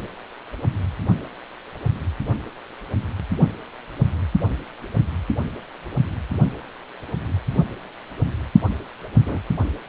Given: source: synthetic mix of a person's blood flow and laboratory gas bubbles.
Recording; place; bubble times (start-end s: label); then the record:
Doppler ultrasound of blood flow; precordium
9.20-9.39 s: bubbles
From the record:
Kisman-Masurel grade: 111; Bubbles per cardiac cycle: 1 to 2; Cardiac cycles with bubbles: 1 to 10%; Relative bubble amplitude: barely perceptible (0.100 to 0.250); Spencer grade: 1 (occasional bubble signal discernible with the cardiac motion signal, with majority of cardiac periods free of bubbles); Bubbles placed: only in the low amplitude regions of the cardiac cycle